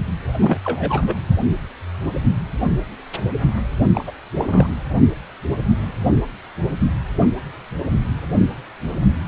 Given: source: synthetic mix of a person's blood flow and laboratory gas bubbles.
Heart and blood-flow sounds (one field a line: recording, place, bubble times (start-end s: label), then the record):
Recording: Doppler ultrasound of blood flow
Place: precordium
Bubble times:
0.40-0.58 s: bubbles
0.65-1.15 s: bubbles
3.93-4.04 s: bubbles
4.07-4.11 s: bubbles
4.35-4.70 s: bubbles
From the record:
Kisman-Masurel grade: 222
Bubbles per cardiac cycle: several, 3 to 8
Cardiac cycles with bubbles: 10 to 50%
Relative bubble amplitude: moderate (0.250 to 0.450)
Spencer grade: 2 (many but less than half of the cardiac periods contain bubble signals, singularly or in groups)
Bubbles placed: anywhere in the cardiac cycle